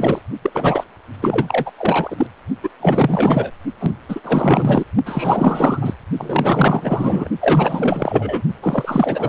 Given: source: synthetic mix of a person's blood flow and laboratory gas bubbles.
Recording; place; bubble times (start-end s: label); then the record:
Doppler ultrasound of blood flow; precordium
0.00-0.19 s: bubbles
0.42-0.84 s: bubbles
1.22-1.72 s: bubbles
1.78-2.26 s: bubbles
2.63-2.70 s: bubbles
2.79-3.51 s: bubbles
3.79-3.92 s: bubbles
4.08-4.21 s: bubbles
4.25-4.84 s: bubbles
5.06-5.95 s: bubbles
6.17-7.29 s: bubbles
7.41-8.42 s: bubbles
8.62-9.29 s: bubbles
From the record:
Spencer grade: 4 (maximum detectable bubble signal sounding continuously throughout systole and diastole of every cardiac period, and overriding the amplitude of the normal cardiac signals); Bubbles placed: only in the low amplitude regions of the cardiac cycle